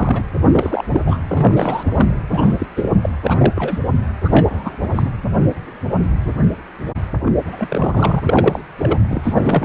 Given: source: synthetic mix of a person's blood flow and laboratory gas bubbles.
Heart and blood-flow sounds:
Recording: Doppler ultrasound of blood flow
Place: precordium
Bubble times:
0.00-0.23 s: bubbles
0.52-0.84 s: bubbles
0.88-1.02 s: bubbles
1.06-1.18 s: bubbles
1.27-2.17 s: bubbles
2.31-2.56 s: bubbles
2.60-2.66 s: bubbles
2.76-2.89 s: bubbles
3.02-3.10 s: bubbles
3.24-3.53 s: bubbles
3.56-3.80 s: bubbles
4.24-5.09 s: bubbles
7.25-7.32 s: bubbles
7.45-8.21 s: bubbles
8.23-8.61 s: bubbles
8.78-8.99 s: bubbles
9.08-9.65 s: bubbles
From the record:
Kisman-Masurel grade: 332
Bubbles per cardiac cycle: rolling drumbeat, 9 or more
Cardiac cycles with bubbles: 50 to 99%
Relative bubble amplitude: moderate (0.250 to 0.450)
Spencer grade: 3 (all of the cardiac periods contain showers or single bubble signals, but not dominating or overriding the cardiac motion signals)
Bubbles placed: anywhere in the cardiac cycle

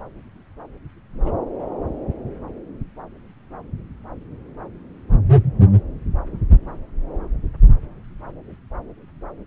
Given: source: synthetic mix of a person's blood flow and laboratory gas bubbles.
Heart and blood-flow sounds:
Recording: Doppler ultrasound of blood flow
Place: subclavian vein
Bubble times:
1.24-1.32 s: bubbles
From the record:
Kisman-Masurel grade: 111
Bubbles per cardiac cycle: 1 to 2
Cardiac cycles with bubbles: 1 to 10%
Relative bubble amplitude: barely perceptible (0.100 to 0.250)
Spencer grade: 1 (occasional bubble signal discernible with the cardiac motion signal, with majority of cardiac periods free of bubbles)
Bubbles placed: anywhere in the cardiac cycle

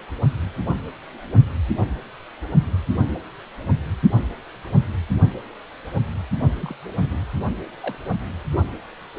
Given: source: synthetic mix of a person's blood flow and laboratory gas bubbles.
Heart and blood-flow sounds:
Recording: Doppler ultrasound of blood flow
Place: precordium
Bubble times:
6.52-6.76 s: bubbles
7.02-7.20 s: bubbles
7.81-7.95 s: bubbles
From the record:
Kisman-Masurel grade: 211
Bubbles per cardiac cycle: several, 3 to 8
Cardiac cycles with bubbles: 1 to 10%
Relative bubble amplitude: barely perceptible (0.100 to 0.250)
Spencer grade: 1 (occasional bubble signal discernible with the cardiac motion signal, with majority of cardiac periods free of bubbles)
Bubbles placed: only in the low amplitude regions of the cardiac cycle

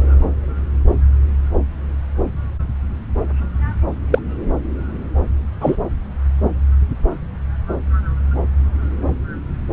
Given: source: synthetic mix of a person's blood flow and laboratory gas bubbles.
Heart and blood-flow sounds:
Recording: Doppler ultrasound of blood flow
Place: subclavian vein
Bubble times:
4.11-4.19 s: bubbles
5.60-5.76 s: bubbles
From the record:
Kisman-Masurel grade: 123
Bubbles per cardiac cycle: 1 to 2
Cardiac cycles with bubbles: 10 to 50%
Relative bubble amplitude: loud (0.450 to 0.775)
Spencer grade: 2 (many but less than half of the cardiac periods contain bubble signals, singularly or in groups)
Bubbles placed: anywhere in the cardiac cycle

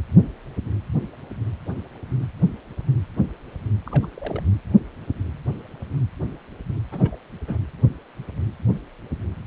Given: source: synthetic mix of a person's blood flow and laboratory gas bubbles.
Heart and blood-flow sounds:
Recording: Doppler ultrasound of blood flow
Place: precordium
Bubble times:
3.85-4.06 s: bubbles
4.17-4.42 s: bubbles
6.92-7.15 s: bubbles
7.47-7.57 s: bubbles
From the record:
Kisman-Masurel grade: 211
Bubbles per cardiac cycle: several, 3 to 8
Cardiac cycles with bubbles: 1 to 10%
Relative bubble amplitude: barely perceptible (0.100 to 0.250)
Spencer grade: 1 (occasional bubble signal discernible with the cardiac motion signal, with majority of cardiac periods free of bubbles)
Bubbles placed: anywhere in the cardiac cycle

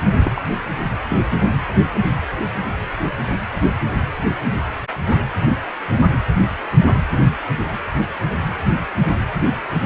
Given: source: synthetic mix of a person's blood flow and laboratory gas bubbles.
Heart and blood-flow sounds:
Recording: Doppler ultrasound of blood flow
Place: precordium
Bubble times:
0.24-0.32 s: bubbles
0.35-0.42 s: bubbles
1.09-1.24 s: bubbles
From the record:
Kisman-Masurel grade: 212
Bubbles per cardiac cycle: several, 3 to 8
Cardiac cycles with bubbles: 1 to 10%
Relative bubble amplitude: moderate (0.250 to 0.450)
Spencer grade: 1 (occasional bubble signal discernible with the cardiac motion signal, with majority of cardiac periods free of bubbles)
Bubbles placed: anywhere in the cardiac cycle

